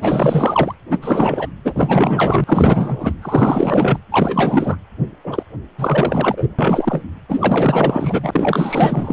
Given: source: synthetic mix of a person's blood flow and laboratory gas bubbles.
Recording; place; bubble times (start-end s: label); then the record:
Doppler ultrasound of blood flow; precordium
0.02-0.74 s: bubbles
0.90-0.98 s: bubbles
1.02-1.48 s: bubbles
1.64-3.12 s: bubbles
3.22-3.99 s: bubbles
4.12-4.77 s: bubbles
5.24-5.43 s: bubbles
5.78-6.47 s: bubbles
6.58-7.04 s: bubbles
7.29-9.13 s: bubbles
From the record:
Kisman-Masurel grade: 444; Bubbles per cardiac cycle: continuous sound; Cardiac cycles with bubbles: 100%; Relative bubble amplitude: maximal (0.775 to 0.999); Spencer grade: 4 (maximum detectable bubble signal sounding continuously throughout systole and diastole of every cardiac period, and overriding the amplitude of the normal cardiac signals); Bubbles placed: anywhere in the cardiac cycle